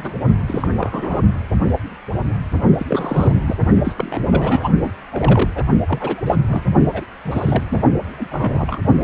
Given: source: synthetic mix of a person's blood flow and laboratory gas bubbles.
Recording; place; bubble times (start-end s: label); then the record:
Doppler ultrasound of blood flow; precordium
0.00-0.14 s: bubbles
0.47-0.68 s: bubbles
0.77-1.21 s: bubbles
2.77-2.86 s: bubbles
2.89-3.33 s: bubbles
3.46-3.56 s: bubbles
3.84-3.94 s: bubbles
3.97-4.21 s: bubbles
4.30-4.70 s: bubbles
4.84-4.92 s: bubbles
5.10-5.50 s: bubbles
5.54-5.63 s: bubbles
5.88-6.36 s: bubbles
6.48-6.62 s: bubbles
6.92-7.05 s: bubbles
7.24-7.64 s: bubbles
7.70-7.80 s: bubbles
8.18-8.27 s: bubbles
8.31-8.81 s: bubbles
From the record:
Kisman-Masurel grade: 232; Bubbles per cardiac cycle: several, 3 to 8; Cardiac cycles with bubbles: 50 to 99%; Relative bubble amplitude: moderate (0.250 to 0.450); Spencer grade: 3 (all of the cardiac periods contain showers or single bubble signals, but not dominating or overriding the cardiac motion signals); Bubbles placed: only in the low amplitude regions of the cardiac cycle